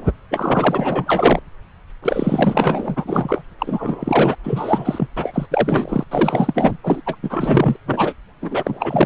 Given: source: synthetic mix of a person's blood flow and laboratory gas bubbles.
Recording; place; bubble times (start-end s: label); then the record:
Doppler ultrasound of blood flow; subclavian vein
0.00-0.12 s: bubbles
0.30-1.40 s: bubbles
2.02-3.45 s: bubbles
3.58-4.35 s: bubbles
4.43-5.08 s: bubbles
5.17-5.46 s: bubbles
5.50-6.04 s: bubbles
6.11-6.77 s: bubbles
6.83-7.01 s: bubbles
7.05-7.17 s: bubbles
7.22-7.76 s: bubbles
7.85-8.13 s: bubbles
8.42-9.06 s: bubbles
From the record:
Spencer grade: 4 (maximum detectable bubble signal sounding continuously throughout systole and diastole of every cardiac period, and overriding the amplitude of the normal cardiac signals); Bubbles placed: anywhere in the cardiac cycle